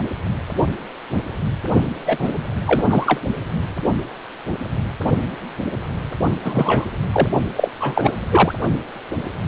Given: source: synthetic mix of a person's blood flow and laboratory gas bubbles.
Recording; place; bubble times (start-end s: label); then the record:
Doppler ultrasound of blood flow; precordium
2.06-2.31 s: bubbles
2.66-2.86 s: bubbles
2.90-3.21 s: bubbles
6.44-6.87 s: bubbles
7.12-7.29 s: bubbles
7.56-7.68 s: bubbles
7.79-8.18 s: bubbles
8.30-8.54 s: bubbles
From the record:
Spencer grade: 2 (many but less than half of the cardiac periods contain bubble signals, singularly or in groups); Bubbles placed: only in the low amplitude regions of the cardiac cycle